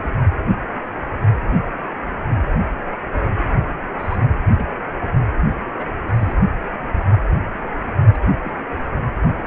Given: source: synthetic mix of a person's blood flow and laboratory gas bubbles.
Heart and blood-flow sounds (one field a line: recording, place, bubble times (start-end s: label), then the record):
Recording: Doppler ultrasound of blood flow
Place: precordium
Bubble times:
0.00-0.13 s: bubbles
3.98-4.17 s: bubbles
4.53-4.66 s: bubbles
5.77-5.86 s: bubbles
6.08-6.33 s: bubbles
8.13-8.18 s: bubbles
8.43-8.91 s: bubbles
From the record:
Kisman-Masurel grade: 121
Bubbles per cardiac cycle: 1 to 2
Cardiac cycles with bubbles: 10 to 50%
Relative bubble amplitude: barely perceptible (0.100 to 0.250)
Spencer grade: 2 (many but less than half of the cardiac periods contain bubble signals, singularly or in groups)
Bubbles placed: only in the low amplitude regions of the cardiac cycle